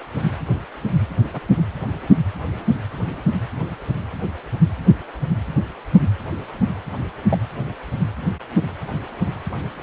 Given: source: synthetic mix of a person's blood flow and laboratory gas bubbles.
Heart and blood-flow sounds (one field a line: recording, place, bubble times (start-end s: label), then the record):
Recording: Doppler ultrasound of blood flow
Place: precordium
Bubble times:
1.33-1.40 s: bubbles
7.29-7.38 s: bubbles
9.52-9.57 s: bubbles
From the record:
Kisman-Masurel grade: 121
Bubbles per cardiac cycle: 1 to 2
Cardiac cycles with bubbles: 10 to 50%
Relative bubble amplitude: barely perceptible (0.100 to 0.250)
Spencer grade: 2 (many but less than half of the cardiac periods contain bubble signals, singularly or in groups)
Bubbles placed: anywhere in the cardiac cycle